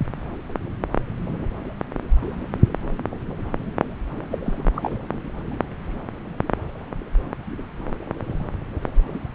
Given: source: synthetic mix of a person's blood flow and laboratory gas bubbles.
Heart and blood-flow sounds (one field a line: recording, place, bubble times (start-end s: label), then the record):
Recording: Doppler ultrasound of blood flow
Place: subclavian vein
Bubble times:
4.30-4.38 s: bubbles
4.44-4.63 s: bubbles
4.75-4.98 s: bubbles
From the record:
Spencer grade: 1 (occasional bubble signal discernible with the cardiac motion signal, with majority of cardiac periods free of bubbles)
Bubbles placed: anywhere in the cardiac cycle